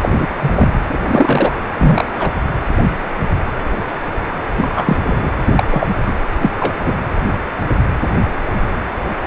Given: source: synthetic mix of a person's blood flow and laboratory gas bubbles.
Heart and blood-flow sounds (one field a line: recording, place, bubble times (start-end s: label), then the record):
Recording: Doppler ultrasound of blood flow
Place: precordium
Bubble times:
0.01-0.27 s: bubbles
0.39-0.68 s: bubbles
0.89-0.98 s: bubbles
1.02-1.51 s: bubbles
1.77-2.05 s: bubbles
2.19-2.31 s: bubbles
4.57-4.70 s: bubbles
4.75-4.97 s: bubbles
5.05-5.29 s: bubbles
5.45-5.54 s: bubbles
5.56-5.87 s: bubbles
6.05-6.13 s: bubbles
6.42-6.51 s: bubbles
6.59-6.78 s: bubbles
6.84-6.93 s: bubbles
From the record:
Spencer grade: 3 (all of the cardiac periods contain showers or single bubble signals, but not dominating or overriding the cardiac motion signals)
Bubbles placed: anywhere in the cardiac cycle